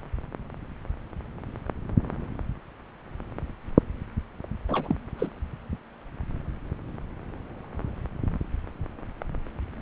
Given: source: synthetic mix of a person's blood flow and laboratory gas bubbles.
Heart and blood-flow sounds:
Doppler ultrasound of blood flow; subclavian vein
4.68-4.96 s: bubbles
5.13-5.34 s: bubbles
From the record:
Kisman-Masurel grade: 212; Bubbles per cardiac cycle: several, 3 to 8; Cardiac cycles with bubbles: 1 to 10%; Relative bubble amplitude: moderate (0.250 to 0.450); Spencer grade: 1 (occasional bubble signal discernible with the cardiac motion signal, with majority of cardiac periods free of bubbles); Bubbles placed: anywhere in the cardiac cycle

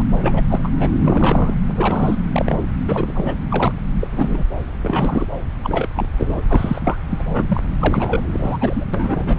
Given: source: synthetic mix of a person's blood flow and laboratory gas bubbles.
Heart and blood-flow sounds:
Doppler ultrasound of blood flow; subclavian vein
0.00-0.02 s: bubbles
0.22-0.43 s: bubbles
0.50-0.92 s: bubbles
1.01-1.54 s: bubbles
1.68-2.19 s: bubbles
2.32-2.68 s: bubbles
2.88-3.35 s: bubbles
3.50-3.73 s: bubbles
4.01-4.07 s: bubbles
4.12-4.44 s: bubbles
4.74-5.27 s: bubbles
5.64-5.89 s: bubbles
5.95-6.08 s: bubbles
6.18-6.41 s: bubbles
6.49-6.97 s: bubbles
7.11-7.61 s: bubbles
7.79-8.21 s: bubbles
8.31-8.85 s: bubbles
8.93-9.39 s: bubbles
From the record:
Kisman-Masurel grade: 242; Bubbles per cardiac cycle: several, 3 to 8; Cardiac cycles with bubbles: 100%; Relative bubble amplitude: moderate (0.250 to 0.450); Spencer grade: 3 (all of the cardiac periods contain showers or single bubble signals, but not dominating or overriding the cardiac motion signals); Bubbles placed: anywhere in the cardiac cycle

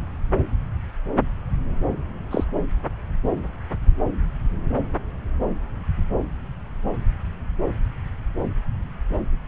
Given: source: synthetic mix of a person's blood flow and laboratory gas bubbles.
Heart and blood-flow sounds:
Doppler ultrasound of blood flow; subclavian vein
2.30-2.44 s: bubbles
From the record:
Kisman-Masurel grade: 112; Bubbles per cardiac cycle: 1 to 2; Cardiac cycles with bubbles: 1 to 10%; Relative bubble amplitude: moderate (0.250 to 0.450); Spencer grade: 1 (occasional bubble signal discernible with the cardiac motion signal, with majority of cardiac periods free of bubbles); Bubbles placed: anywhere in the cardiac cycle

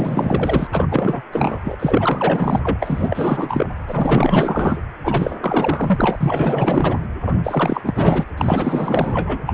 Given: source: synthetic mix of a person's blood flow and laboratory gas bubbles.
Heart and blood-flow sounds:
Doppler ultrasound of blood flow; precordium
0.00-0.68 s: bubbles
0.71-0.87 s: bubbles
0.91-1.22 s: bubbles
1.32-1.76 s: bubbles
1.79-2.77 s: bubbles
2.80-3.71 s: bubbles
3.87-4.83 s: bubbles
5.04-5.34 s: bubbles
5.41-7.07 s: bubbles
7.26-7.34 s: bubbles
7.43-7.82 s: bubbles
7.84-8.25 s: bubbles
8.37-9.44 s: bubbles
9.46-9.54 s: bubbles
From the record:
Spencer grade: 4 (maximum detectable bubble signal sounding continuously throughout systole and diastole of every cardiac period, and overriding the amplitude of the normal cardiac signals); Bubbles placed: anywhere in the cardiac cycle

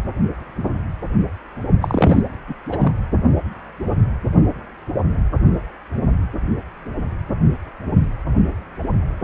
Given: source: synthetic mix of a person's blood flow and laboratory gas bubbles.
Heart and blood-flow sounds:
Doppler ultrasound of blood flow; precordium
1.81-2.23 s: bubbles
2.48-2.54 s: bubbles
2.71-2.92 s: bubbles
From the record:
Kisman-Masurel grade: 212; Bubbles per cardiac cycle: several, 3 to 8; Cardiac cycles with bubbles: 1 to 10%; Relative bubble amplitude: moderate (0.250 to 0.450); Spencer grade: 1 (occasional bubble signal discernible with the cardiac motion signal, with majority of cardiac periods free of bubbles); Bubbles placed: only in the low amplitude regions of the cardiac cycle

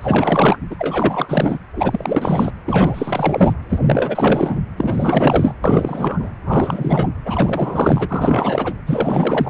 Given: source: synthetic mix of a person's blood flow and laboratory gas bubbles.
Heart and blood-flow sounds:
Doppler ultrasound of blood flow; precordium
0.01-0.58 s: bubbles
0.70-0.76 s: bubbles
0.78-1.58 s: bubbles
1.76-2.52 s: bubbles
2.66-3.53 s: bubbles
3.69-4.60 s: bubbles
4.76-5.52 s: bubbles
5.64-6.31 s: bubbles
6.43-7.09 s: bubbles
7.25-8.75 s: bubbles
8.86-9.50 s: bubbles
From the record:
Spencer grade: 4 (maximum detectable bubble signal sounding continuously throughout systole and diastole of every cardiac period, and overriding the amplitude of the normal cardiac signals); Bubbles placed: anywhere in the cardiac cycle

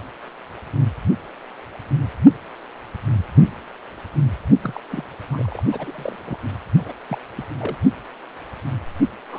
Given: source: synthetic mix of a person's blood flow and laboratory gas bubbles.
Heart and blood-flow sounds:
Doppler ultrasound of blood flow; precordium
4.63-4.80 s: bubbles
4.90-5.04 s: bubbles
5.32-5.62 s: bubbles
5.71-6.16 s: bubbles
6.25-6.39 s: bubbles
6.77-6.96 s: bubbles
7.09-7.18 s: bubbles
7.35-7.46 s: bubbles
7.58-7.78 s: bubbles
9.32-9.39 s: bubbles
From the record:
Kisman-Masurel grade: 221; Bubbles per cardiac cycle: several, 3 to 8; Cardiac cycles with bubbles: 10 to 50%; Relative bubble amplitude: barely perceptible (0.100 to 0.250); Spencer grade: 2 (many but less than half of the cardiac periods contain bubble signals, singularly or in groups); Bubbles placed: only in the low amplitude regions of the cardiac cycle

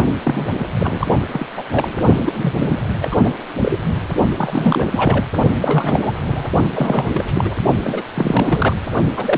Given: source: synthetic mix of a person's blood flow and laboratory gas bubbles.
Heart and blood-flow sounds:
Doppler ultrasound of blood flow; precordium
0.23-0.49 s: bubbles
0.54-0.67 s: bubbles
0.79-1.06 s: bubbles
1.31-1.46 s: bubbles
1.56-1.63 s: bubbles
1.72-1.87 s: bubbles
2.15-2.31 s: bubbles
2.34-2.78 s: bubbles
3.02-3.08 s: bubbles
3.12-3.21 s: bubbles
3.24-3.31 s: bubbles
3.61-3.78 s: bubbles
4.36-4.86 s: bubbles
4.88-5.24 s: bubbles
5.61-6.12 s: bubbles
6.23-6.51 s: bubbles
6.70-7.25 s: bubbles
7.27-7.32 s: bubbles
7.35-7.54 s: bubbles
7.83-8.03 s: bubbles
8.14-8.76 s: bubbles
9.16-9.38 s: bubbles
From the record:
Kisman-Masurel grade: 342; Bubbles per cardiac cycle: rolling drumbeat, 9 or more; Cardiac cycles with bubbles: 100%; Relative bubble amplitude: moderate (0.250 to 0.450); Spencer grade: 3 (all of the cardiac periods contain showers or single bubble signals, but not dominating or overriding the cardiac motion signals); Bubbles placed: only in the low amplitude regions of the cardiac cycle

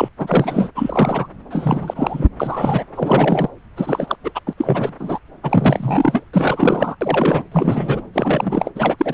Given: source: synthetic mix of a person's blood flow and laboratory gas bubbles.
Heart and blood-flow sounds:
Doppler ultrasound of blood flow; subclavian vein
0.00-0.08 s: bubbles
0.19-0.70 s: bubbles
0.75-1.27 s: bubbles
1.50-2.27 s: bubbles
2.40-2.84 s: bubbles
2.95-3.49 s: bubbles
3.76-4.16 s: bubbles
4.24-4.32 s: bubbles
4.35-4.39 s: bubbles
4.46-4.54 s: bubbles
4.58-4.93 s: bubbles
4.99-5.20 s: bubbles
5.43-6.24 s: bubbles
6.33-6.96 s: bubbles
7.01-7.42 s: bubbles
7.52-8.01 s: bubbles
8.13-8.70 s: bubbles
8.75-8.96 s: bubbles
8.99-9.14 s: bubbles
From the record:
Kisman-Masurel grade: 342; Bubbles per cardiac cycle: rolling drumbeat, 9 or more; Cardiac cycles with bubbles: 100%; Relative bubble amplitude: moderate (0.250 to 0.450); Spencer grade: 3 (all of the cardiac periods contain showers or single bubble signals, but not dominating or overriding the cardiac motion signals); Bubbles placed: anywhere in the cardiac cycle

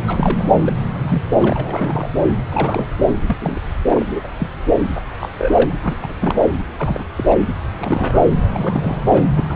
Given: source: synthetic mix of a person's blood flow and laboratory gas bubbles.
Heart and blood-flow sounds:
Doppler ultrasound of blood flow; subclavian vein
0.07-0.44 s: bubbles
0.61-0.73 s: bubbles
0.99-1.21 s: bubbles
1.39-2.08 s: bubbles
2.50-2.87 s: bubbles
3.27-3.37 s: bubbles
3.40-3.59 s: bubbles
3.90-4.06 s: bubbles
4.11-4.21 s: bubbles
4.23-4.29 s: bubbles
4.39-4.47 s: bubbles
5.20-5.29 s: bubbles
5.38-5.72 s: bubbles
5.82-5.96 s: bubbles
6.01-6.39 s: bubbles
6.79-7.03 s: bubbles
7.16-7.24 s: bubbles
7.28-7.44 s: bubbles
7.79-8.24 s: bubbles
8.54-9.01 s: bubbles
9.05-9.26 s: bubbles
9.38-9.56 s: bubbles
From the record:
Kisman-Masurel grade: 242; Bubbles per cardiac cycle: several, 3 to 8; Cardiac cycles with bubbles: 100%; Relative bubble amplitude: moderate (0.250 to 0.450); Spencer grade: 3 (all of the cardiac periods contain showers or single bubble signals, but not dominating or overriding the cardiac motion signals); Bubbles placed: anywhere in the cardiac cycle

